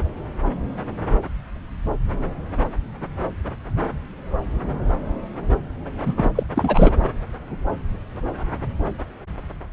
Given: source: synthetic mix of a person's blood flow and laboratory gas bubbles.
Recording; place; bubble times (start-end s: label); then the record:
Doppler ultrasound of blood flow; subclavian vein
6.05-6.13 s: bubbles
6.16-6.31 s: bubbles
6.35-6.43 s: bubbles
6.55-6.92 s: bubbles
From the record:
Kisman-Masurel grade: 213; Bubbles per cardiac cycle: several, 3 to 8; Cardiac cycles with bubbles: 1 to 10%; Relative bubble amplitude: loud (0.450 to 0.775); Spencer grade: 1 (occasional bubble signal discernible with the cardiac motion signal, with majority of cardiac periods free of bubbles); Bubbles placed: anywhere in the cardiac cycle